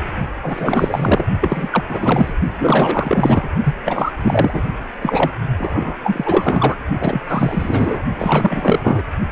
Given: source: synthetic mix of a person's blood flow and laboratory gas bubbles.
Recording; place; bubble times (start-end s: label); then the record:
Doppler ultrasound of blood flow; precordium
0.41-1.25 s: bubbles
1.40-1.83 s: bubbles
1.88-2.33 s: bubbles
2.58-3.50 s: bubbles
3.64-3.74 s: bubbles
3.85-4.11 s: bubbles
4.22-4.62 s: bubbles
5.01-5.31 s: bubbles
5.57-5.97 s: bubbles
6.03-6.75 s: bubbles
7.00-7.21 s: bubbles
7.28-8.03 s: bubbles
8.19-9.03 s: bubbles
9.30-9.32 s: bubbles
From the record:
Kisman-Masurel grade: 444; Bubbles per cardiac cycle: continuous sound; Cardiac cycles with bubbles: 100%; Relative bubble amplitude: maximal (0.775 to 0.999); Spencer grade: 4 (maximum detectable bubble signal sounding continuously throughout systole and diastole of every cardiac period, and overriding the amplitude of the normal cardiac signals); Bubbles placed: only in the low amplitude regions of the cardiac cycle